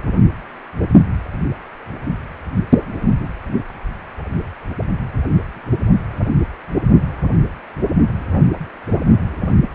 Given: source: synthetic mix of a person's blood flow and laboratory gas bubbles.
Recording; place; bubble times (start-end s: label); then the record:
Doppler ultrasound of blood flow; precordium
no bubbles
From the record:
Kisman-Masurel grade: 000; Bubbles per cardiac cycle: 0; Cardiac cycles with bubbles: 0%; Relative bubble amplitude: no bubbles discernible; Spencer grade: 0 (complete lack of bubble signals)